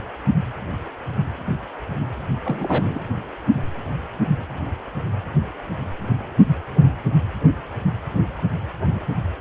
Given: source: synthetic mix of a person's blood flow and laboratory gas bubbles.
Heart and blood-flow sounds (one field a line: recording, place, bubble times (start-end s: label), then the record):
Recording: Doppler ultrasound of blood flow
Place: precordium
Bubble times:
2.44-3.00 s: bubbles
From the record:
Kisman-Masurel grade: 212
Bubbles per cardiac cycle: several, 3 to 8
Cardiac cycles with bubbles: 1 to 10%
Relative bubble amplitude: moderate (0.250 to 0.450)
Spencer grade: 1 (occasional bubble signal discernible with the cardiac motion signal, with majority of cardiac periods free of bubbles)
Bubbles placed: anywhere in the cardiac cycle